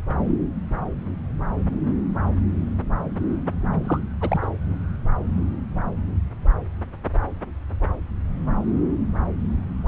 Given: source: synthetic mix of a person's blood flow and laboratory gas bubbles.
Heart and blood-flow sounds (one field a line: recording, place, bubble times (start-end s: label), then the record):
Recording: Doppler ultrasound of blood flow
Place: subclavian vein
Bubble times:
3.83-4.00 s: bubbles
4.20-4.46 s: bubbles
From the record:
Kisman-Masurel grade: 212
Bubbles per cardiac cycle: several, 3 to 8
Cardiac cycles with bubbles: 1 to 10%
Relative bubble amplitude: moderate (0.250 to 0.450)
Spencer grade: 1 (occasional bubble signal discernible with the cardiac motion signal, with majority of cardiac periods free of bubbles)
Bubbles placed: anywhere in the cardiac cycle